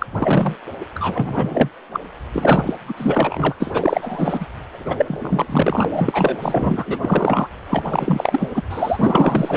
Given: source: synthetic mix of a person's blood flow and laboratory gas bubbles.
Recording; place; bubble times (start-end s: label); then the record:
Doppler ultrasound of blood flow; precordium
0.00-0.06 s: bubbles
0.19-0.55 s: bubbles
0.94-1.69 s: bubbles
1.92-2.00 s: bubbles
2.33-2.75 s: bubbles
2.88-2.94 s: bubbles
2.97-3.55 s: bubbles
3.59-4.46 s: bubbles
4.72-5.46 s: bubbles
5.49-6.39 s: bubbles
6.42-6.99 s: bubbles
7.02-7.47 s: bubbles
7.65-8.62 s: bubbles
8.70-9.57 s: bubbles
From the record:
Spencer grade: 4 (maximum detectable bubble signal sounding continuously throughout systole and diastole of every cardiac period, and overriding the amplitude of the normal cardiac signals); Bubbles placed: anywhere in the cardiac cycle